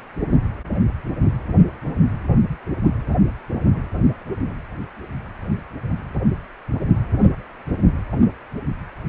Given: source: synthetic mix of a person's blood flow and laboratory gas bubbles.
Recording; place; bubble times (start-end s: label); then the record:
Doppler ultrasound of blood flow; precordium
no bubbles
From the record:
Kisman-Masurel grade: 000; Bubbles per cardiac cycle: 0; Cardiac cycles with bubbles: 0%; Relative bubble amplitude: no bubbles discernible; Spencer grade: 0 (complete lack of bubble signals)